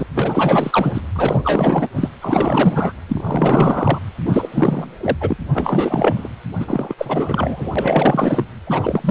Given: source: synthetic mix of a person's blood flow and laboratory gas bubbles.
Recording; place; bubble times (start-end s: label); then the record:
Doppler ultrasound of blood flow; precordium
0.00-0.07 s: bubbles
0.14-1.02 s: bubbles
1.14-1.88 s: bubbles
1.95-2.08 s: bubbles
2.21-2.92 s: bubbles
3.08-3.99 s: bubbles
4.25-4.97 s: bubbles
5.00-5.17 s: bubbles
5.20-5.37 s: bubbles
5.54-6.29 s: bubbles
6.59-6.94 s: bubbles
6.97-7.73 s: bubbles
7.75-8.44 s: bubbles
8.67-9.11 s: bubbles
From the record:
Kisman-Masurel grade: 444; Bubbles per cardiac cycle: continuous sound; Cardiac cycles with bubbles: 100%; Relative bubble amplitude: maximal (0.775 to 0.999); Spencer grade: 4 (maximum detectable bubble signal sounding continuously throughout systole and diastole of every cardiac period, and overriding the amplitude of the normal cardiac signals); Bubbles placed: anywhere in the cardiac cycle